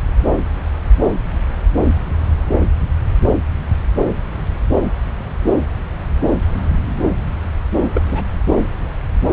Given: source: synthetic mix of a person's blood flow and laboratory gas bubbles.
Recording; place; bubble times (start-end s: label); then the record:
Doppler ultrasound of blood flow; subclavian vein
7.94-8.01 s: bubbles
8.10-8.24 s: bubbles
From the record:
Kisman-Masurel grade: 212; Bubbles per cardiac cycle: several, 3 to 8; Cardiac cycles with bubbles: 1 to 10%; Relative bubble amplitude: moderate (0.250 to 0.450); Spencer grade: 1 (occasional bubble signal discernible with the cardiac motion signal, with majority of cardiac periods free of bubbles); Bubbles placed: anywhere in the cardiac cycle